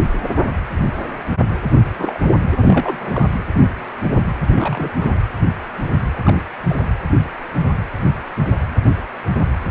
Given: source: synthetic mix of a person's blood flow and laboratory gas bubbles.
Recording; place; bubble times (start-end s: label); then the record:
Doppler ultrasound of blood flow; precordium
1.71-1.77 s: bubbles
1.97-2.18 s: bubbles
2.21-2.31 s: bubbles
2.61-3.27 s: bubbles
4.54-4.91 s: bubbles
5.00-5.15 s: bubbles
6.25-6.43 s: bubbles
6.69-6.84 s: bubbles
From the record:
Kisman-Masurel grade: 222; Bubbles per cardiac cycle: several, 3 to 8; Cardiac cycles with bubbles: 10 to 50%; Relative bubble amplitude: moderate (0.250 to 0.450); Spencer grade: 2 (many but less than half of the cardiac periods contain bubble signals, singularly or in groups); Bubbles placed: anywhere in the cardiac cycle